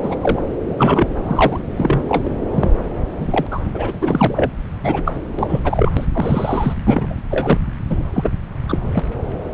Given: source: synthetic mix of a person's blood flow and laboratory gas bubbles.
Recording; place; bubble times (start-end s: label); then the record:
Doppler ultrasound of blood flow; subclavian vein
0.02-0.16 s: bubbles
0.21-0.41 s: bubbles
0.78-1.06 s: bubbles
1.24-1.59 s: bubbles
1.77-2.00 s: bubbles
2.08-2.39 s: bubbles
2.54-2.71 s: bubbles
3.20-3.47 s: bubbles
3.51-3.60 s: bubbles
3.74-4.51 s: bubbles
4.83-5.19 s: bubbles
5.35-5.60 s: bubbles
5.63-5.92 s: bubbles
5.94-6.05 s: bubbles
6.13-6.73 s: bubbles
6.84-7.15 s: bubbles
7.30-7.58 s: bubbles
7.90-8.03 s: bubbles
8.13-8.30 s: bubbles
8.68-8.79 s: bubbles
8.92-9.00 s: bubbles
From the record:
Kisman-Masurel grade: 233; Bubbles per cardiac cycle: several, 3 to 8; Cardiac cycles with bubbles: 50 to 99%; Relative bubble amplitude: loud (0.450 to 0.775); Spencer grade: 3 (all of the cardiac periods contain showers or single bubble signals, but not dominating or overriding the cardiac motion signals); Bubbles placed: anywhere in the cardiac cycle